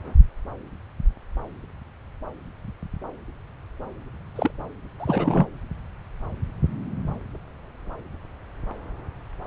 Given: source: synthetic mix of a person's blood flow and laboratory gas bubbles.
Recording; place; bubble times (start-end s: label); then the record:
Doppler ultrasound of blood flow; subclavian vein
4.35-4.50 s: bubbles
5.00-5.46 s: bubbles
From the record:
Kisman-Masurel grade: 212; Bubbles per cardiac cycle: several, 3 to 8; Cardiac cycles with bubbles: 1 to 10%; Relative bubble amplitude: moderate (0.250 to 0.450); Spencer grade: 1 (occasional bubble signal discernible with the cardiac motion signal, with majority of cardiac periods free of bubbles); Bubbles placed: anywhere in the cardiac cycle